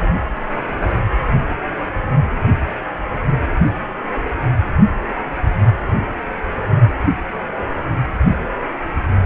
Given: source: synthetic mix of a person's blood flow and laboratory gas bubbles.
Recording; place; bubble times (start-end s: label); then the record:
Doppler ultrasound of blood flow; precordium
no bubbles
From the record:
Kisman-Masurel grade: 000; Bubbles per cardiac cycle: 0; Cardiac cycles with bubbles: 0%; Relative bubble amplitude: no bubbles discernible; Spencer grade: 0 (complete lack of bubble signals)